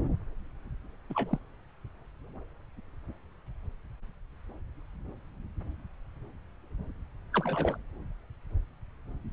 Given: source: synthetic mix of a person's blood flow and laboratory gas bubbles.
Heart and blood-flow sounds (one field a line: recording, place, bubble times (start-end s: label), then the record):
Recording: Doppler ultrasound of blood flow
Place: subclavian vein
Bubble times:
1.10-1.38 s: bubbles
7.33-7.76 s: bubbles
From the record:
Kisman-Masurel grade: 211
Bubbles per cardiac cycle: several, 3 to 8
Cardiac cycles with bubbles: 1 to 10%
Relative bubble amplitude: barely perceptible (0.100 to 0.250)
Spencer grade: 1 (occasional bubble signal discernible with the cardiac motion signal, with majority of cardiac periods free of bubbles)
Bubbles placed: anywhere in the cardiac cycle